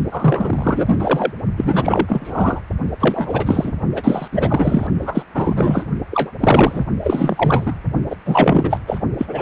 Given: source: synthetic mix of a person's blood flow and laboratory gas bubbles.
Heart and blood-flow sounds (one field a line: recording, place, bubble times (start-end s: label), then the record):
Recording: Doppler ultrasound of blood flow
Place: precordium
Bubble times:
0.11-1.31 s: bubbles
1.57-2.60 s: bubbles
3.00-3.72 s: bubbles
3.95-4.28 s: bubbles
4.32-4.87 s: bubbles
5.01-5.22 s: bubbles
5.34-5.86 s: bubbles
6.11-6.31 s: bubbles
6.40-6.84 s: bubbles
7.00-7.79 s: bubbles
8.10-8.16 s: bubbles
8.25-8.78 s: bubbles
8.87-8.99 s: bubbles
9.18-9.42 s: bubbles
From the record:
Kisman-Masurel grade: 343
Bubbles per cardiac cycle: rolling drumbeat, 9 or more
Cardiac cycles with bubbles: 100%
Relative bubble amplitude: loud (0.450 to 0.775)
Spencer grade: 3 (all of the cardiac periods contain showers or single bubble signals, but not dominating or overriding the cardiac motion signals)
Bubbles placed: only in the low amplitude regions of the cardiac cycle